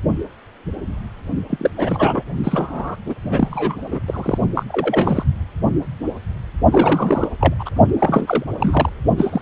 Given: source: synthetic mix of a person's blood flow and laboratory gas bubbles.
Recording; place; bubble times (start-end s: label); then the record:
Doppler ultrasound of blood flow; precordium
1.50-1.71 s: bubbles
1.76-2.24 s: bubbles
2.43-2.96 s: bubbles
3.05-3.14 s: bubbles
3.22-3.99 s: bubbles
4.06-4.38 s: bubbles
4.54-4.63 s: bubbles
4.68-5.23 s: bubbles
6.71-7.27 s: bubbles
7.40-7.54 s: bubbles
7.59-7.69 s: bubbles
7.99-8.44 s: bubbles
8.60-8.89 s: bubbles
9.17-9.41 s: bubbles
From the record:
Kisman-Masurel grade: 332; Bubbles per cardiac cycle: rolling drumbeat, 9 or more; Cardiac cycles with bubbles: 50 to 99%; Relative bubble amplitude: moderate (0.250 to 0.450); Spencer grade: 3 (all of the cardiac periods contain showers or single bubble signals, but not dominating or overriding the cardiac motion signals); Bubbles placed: only in the low amplitude regions of the cardiac cycle